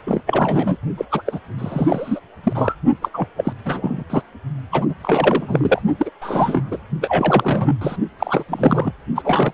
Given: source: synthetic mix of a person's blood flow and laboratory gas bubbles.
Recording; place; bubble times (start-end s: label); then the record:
Doppler ultrasound of blood flow; precordium
0.06-0.22 s: bubbles
0.26-0.76 s: bubbles
0.97-1.05 s: bubbles
1.11-1.22 s: bubbles
1.25-1.40 s: bubbles
1.58-2.20 s: bubbles
2.43-2.75 s: bubbles
3.01-3.08 s: bubbles
3.13-3.28 s: bubbles
3.37-3.53 s: bubbles
3.65-4.04 s: bubbles
4.09-4.21 s: bubbles
4.71-4.86 s: bubbles
4.88-4.94 s: bubbles
5.02-5.82 s: bubbles
5.98-6.10 s: bubbles
6.21-6.80 s: bubbles
7.00-7.74 s: bubbles
7.81-7.96 s: bubbles
8.19-8.44 s: bubbles
8.49-8.91 s: bubbles
9.15-9.52 s: bubbles
From the record:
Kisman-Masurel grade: 343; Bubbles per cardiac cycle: rolling drumbeat, 9 or more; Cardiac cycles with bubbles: 100%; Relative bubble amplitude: loud (0.450 to 0.775); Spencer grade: 3 (all of the cardiac periods contain showers or single bubble signals, but not dominating or overriding the cardiac motion signals); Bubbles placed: only in the low amplitude regions of the cardiac cycle